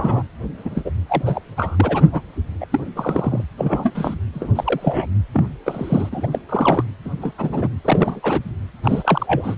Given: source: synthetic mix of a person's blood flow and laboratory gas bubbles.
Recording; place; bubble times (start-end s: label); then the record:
Doppler ultrasound of blood flow; precordium
0.00-0.23 s: bubbles
0.57-0.90 s: bubbles
1.08-1.23 s: bubbles
1.25-1.42 s: bubbles
1.56-2.22 s: bubbles
2.60-2.66 s: bubbles
2.71-2.80 s: bubbles
2.96-3.44 s: bubbles
3.58-4.15 s: bubbles
4.33-4.53 s: bubbles
4.55-5.06 s: bubbles
5.33-5.57 s: bubbles
5.66-6.09 s: bubbles
6.12-6.27 s: bubbles
6.32-6.38 s: bubbles
6.49-6.84 s: bubbles
7.04-7.09 s: bubbles
7.21-7.33 s: bubbles
7.38-7.69 s: bubbles
7.84-8.20 s: bubbles
8.22-8.41 s: bubbles
8.83-9.55 s: bubbles
From the record:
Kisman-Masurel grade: 242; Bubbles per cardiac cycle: several, 3 to 8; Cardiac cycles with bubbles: 100%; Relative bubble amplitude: moderate (0.250 to 0.450); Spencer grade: 3 (all of the cardiac periods contain showers or single bubble signals, but not dominating or overriding the cardiac motion signals); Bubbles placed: anywhere in the cardiac cycle